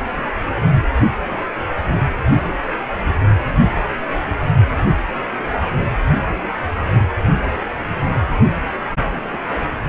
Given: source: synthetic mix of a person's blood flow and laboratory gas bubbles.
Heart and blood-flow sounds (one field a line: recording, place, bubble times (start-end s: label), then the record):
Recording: Doppler ultrasound of blood flow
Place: precordium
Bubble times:
9.05-9.38 s: bubbles
From the record:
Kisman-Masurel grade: 111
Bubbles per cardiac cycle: 1 to 2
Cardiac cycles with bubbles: 1 to 10%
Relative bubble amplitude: barely perceptible (0.100 to 0.250)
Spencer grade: 1 (occasional bubble signal discernible with the cardiac motion signal, with majority of cardiac periods free of bubbles)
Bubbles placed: anywhere in the cardiac cycle